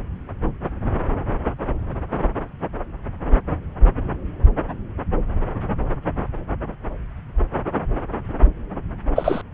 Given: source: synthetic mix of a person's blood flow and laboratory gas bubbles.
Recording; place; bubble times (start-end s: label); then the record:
Doppler ultrasound of blood flow; subclavian vein
9.15-9.41 s: bubbles
From the record:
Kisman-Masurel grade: 113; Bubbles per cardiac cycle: 1 to 2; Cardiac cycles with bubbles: 1 to 10%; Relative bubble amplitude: loud (0.450 to 0.775); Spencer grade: 1 (occasional bubble signal discernible with the cardiac motion signal, with majority of cardiac periods free of bubbles); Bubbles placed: anywhere in the cardiac cycle